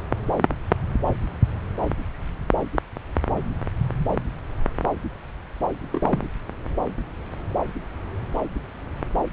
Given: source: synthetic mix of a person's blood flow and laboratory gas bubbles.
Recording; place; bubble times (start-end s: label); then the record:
Doppler ultrasound of blood flow; subclavian vein
5.92-6.27 s: bubbles
From the record:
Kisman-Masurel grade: 111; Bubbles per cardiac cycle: 1 to 2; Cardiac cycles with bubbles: 1 to 10%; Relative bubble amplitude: barely perceptible (0.100 to 0.250); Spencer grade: 1 (occasional bubble signal discernible with the cardiac motion signal, with majority of cardiac periods free of bubbles); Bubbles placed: anywhere in the cardiac cycle